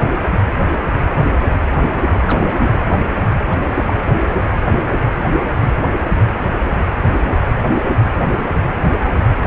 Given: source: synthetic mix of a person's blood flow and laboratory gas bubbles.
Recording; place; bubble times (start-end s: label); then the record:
Doppler ultrasound of blood flow; precordium
2.25-2.71 s: bubbles
3.50-3.58 s: bubbles
3.64-3.95 s: bubbles
From the record:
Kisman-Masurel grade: 221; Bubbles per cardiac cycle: several, 3 to 8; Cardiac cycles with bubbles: 10 to 50%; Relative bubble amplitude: barely perceptible (0.100 to 0.250); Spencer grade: 2 (many but less than half of the cardiac periods contain bubble signals, singularly or in groups); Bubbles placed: anywhere in the cardiac cycle